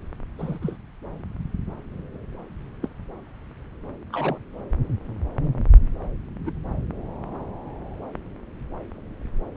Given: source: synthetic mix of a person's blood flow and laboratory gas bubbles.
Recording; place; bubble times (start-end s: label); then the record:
Doppler ultrasound of blood flow; subclavian vein
0.39-0.58 s: bubbles
0.62-0.77 s: bubbles
2.82-2.88 s: bubbles
4.12-4.38 s: bubbles
6.46-6.51 s: bubbles
From the record:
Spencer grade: 2 (many but less than half of the cardiac periods contain bubble signals, singularly or in groups); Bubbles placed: anywhere in the cardiac cycle